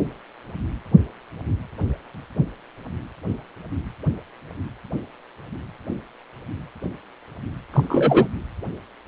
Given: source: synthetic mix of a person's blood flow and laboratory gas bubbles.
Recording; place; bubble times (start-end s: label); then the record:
Doppler ultrasound of blood flow; precordium
7.72-8.27 s: bubbles
From the record:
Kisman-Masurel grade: 213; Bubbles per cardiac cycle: several, 3 to 8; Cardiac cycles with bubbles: 1 to 10%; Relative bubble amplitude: loud (0.450 to 0.775); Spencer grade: 1 (occasional bubble signal discernible with the cardiac motion signal, with majority of cardiac periods free of bubbles); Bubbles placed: anywhere in the cardiac cycle